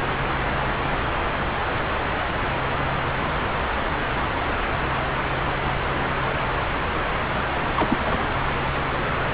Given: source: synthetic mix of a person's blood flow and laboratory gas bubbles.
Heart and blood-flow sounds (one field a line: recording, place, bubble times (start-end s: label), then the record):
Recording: Doppler ultrasound of blood flow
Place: subclavian vein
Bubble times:
7.76-7.97 s: bubbles
8.05-8.17 s: bubbles
From the record:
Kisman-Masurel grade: 212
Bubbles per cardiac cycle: several, 3 to 8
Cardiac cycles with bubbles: 1 to 10%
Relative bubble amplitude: moderate (0.250 to 0.450)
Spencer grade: 1 (occasional bubble signal discernible with the cardiac motion signal, with majority of cardiac periods free of bubbles)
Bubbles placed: anywhere in the cardiac cycle